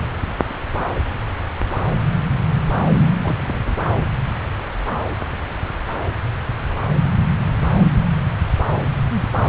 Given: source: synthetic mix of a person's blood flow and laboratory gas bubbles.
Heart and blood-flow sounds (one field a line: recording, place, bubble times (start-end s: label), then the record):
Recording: Doppler ultrasound of blood flow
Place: subclavian vein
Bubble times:
3.23-3.90 s: bubbles
From the record:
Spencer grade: 1 (occasional bubble signal discernible with the cardiac motion signal, with majority of cardiac periods free of bubbles)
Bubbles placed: anywhere in the cardiac cycle